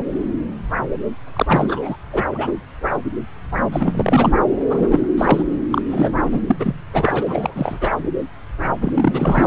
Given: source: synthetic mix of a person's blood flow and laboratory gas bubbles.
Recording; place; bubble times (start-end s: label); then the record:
Doppler ultrasound of blood flow; subclavian vein
1.33-1.96 s: bubbles
2.12-2.23 s: bubbles
2.31-2.52 s: bubbles
3.72-4.33 s: bubbles
4.69-5.08 s: bubbles
5.17-5.43 s: bubbles
5.71-5.82 s: bubbles
5.90-6.11 s: bubbles
6.25-6.40 s: bubbles
6.48-6.57 s: bubbles
6.59-6.75 s: bubbles
6.93-7.79 s: bubbles
7.81-7.90 s: bubbles
8.81-9.47 s: bubbles
From the record:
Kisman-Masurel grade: 333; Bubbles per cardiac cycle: rolling drumbeat, 9 or more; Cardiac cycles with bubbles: 50 to 99%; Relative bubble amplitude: loud (0.450 to 0.775); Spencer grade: 3 (all of the cardiac periods contain showers or single bubble signals, but not dominating or overriding the cardiac motion signals); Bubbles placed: anywhere in the cardiac cycle